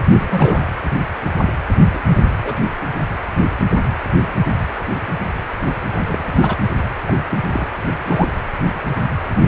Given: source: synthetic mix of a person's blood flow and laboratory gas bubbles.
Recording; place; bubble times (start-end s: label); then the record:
Doppler ultrasound of blood flow; precordium
0.00-0.02 s: bubbles
0.11-0.66 s: bubbles
1.93-1.99 s: bubbles
2.10-2.22 s: bubbles
2.42-2.59 s: bubbles
5.92-6.02 s: bubbles
6.08-6.56 s: bubbles
7.07-7.15 s: bubbles
7.30-7.38 s: bubbles
7.53-7.68 s: bubbles
8.06-8.32 s: bubbles
From the record:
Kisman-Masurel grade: 222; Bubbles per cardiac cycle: several, 3 to 8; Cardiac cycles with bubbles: 10 to 50%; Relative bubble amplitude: moderate (0.250 to 0.450); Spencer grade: 2 (many but less than half of the cardiac periods contain bubble signals, singularly or in groups); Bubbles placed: anywhere in the cardiac cycle